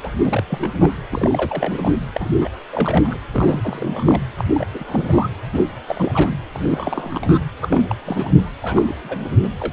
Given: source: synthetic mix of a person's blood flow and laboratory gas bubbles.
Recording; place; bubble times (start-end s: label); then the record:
Doppler ultrasound of blood flow; precordium
0.03-0.11 s: bubbles
0.25-0.44 s: bubbles
0.47-0.71 s: bubbles
0.79-0.91 s: bubbles
1.11-1.93 s: bubbles
2.12-2.31 s: bubbles
2.40-2.50 s: bubbles
2.72-3.18 s: bubbles
3.32-4.21 s: bubbles
4.38-4.44 s: bubbles
4.54-4.66 s: bubbles
4.74-5.29 s: bubbles
5.52-5.66 s: bubbles
5.86-6.35 s: bubbles
6.52-7.40 s: bubbles
7.61-7.95 s: bubbles
8.05-8.51 s: bubbles
8.62-8.93 s: bubbles
9.04-9.35 s: bubbles
9.42-9.48 s: bubbles
9.59-9.73 s: bubbles
From the record:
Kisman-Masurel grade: 342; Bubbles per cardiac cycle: rolling drumbeat, 9 or more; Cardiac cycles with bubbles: 100%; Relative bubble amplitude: moderate (0.250 to 0.450); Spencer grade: 3 (all of the cardiac periods contain showers or single bubble signals, but not dominating or overriding the cardiac motion signals); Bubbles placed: anywhere in the cardiac cycle